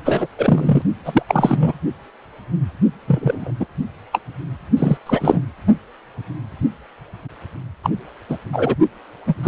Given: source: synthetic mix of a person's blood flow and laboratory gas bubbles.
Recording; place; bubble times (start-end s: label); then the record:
Doppler ultrasound of blood flow; precordium
0.04-0.27 s: bubbles
0.37-0.82 s: bubbles
1.04-1.22 s: bubbles
1.28-1.73 s: bubbles
3.07-3.52 s: bubbles
3.60-3.66 s: bubbles
4.12-4.20 s: bubbles
4.77-4.98 s: bubbles
5.06-5.40 s: bubbles
7.83-7.90 s: bubbles
8.29-8.38 s: bubbles
8.53-8.75 s: bubbles
9.27-9.35 s: bubbles
9.43-9.48 s: bubbles
From the record:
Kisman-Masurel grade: 233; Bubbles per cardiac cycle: several, 3 to 8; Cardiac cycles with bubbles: 50 to 99%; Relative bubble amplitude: loud (0.450 to 0.775); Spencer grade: 3 (all of the cardiac periods contain showers or single bubble signals, but not dominating or overriding the cardiac motion signals); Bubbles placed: only in the low amplitude regions of the cardiac cycle